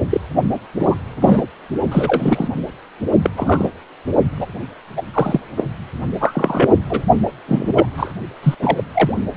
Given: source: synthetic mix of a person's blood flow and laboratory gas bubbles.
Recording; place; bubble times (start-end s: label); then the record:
Doppler ultrasound of blood flow; precordium
0.10-0.20 s: bubbles
0.79-0.96 s: bubbles
1.22-1.47 s: bubbles
1.91-2.48 s: bubbles
3.23-3.30 s: bubbles
3.36-3.69 s: bubbles
4.37-4.47 s: bubbles
4.96-5.02 s: bubbles
5.14-5.40 s: bubbles
5.57-5.64 s: bubbles
6.20-6.70 s: bubbles
6.89-7.03 s: bubbles
7.48-7.86 s: bubbles
7.97-8.13 s: bubbles
8.42-8.55 s: bubbles
8.59-8.83 s: bubbles
8.93-9.17 s: bubbles
From the record:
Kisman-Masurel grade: 243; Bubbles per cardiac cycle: several, 3 to 8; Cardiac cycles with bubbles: 100%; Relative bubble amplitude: loud (0.450 to 0.775); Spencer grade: 3 (all of the cardiac periods contain showers or single bubble signals, but not dominating or overriding the cardiac motion signals); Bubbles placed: only in the low amplitude regions of the cardiac cycle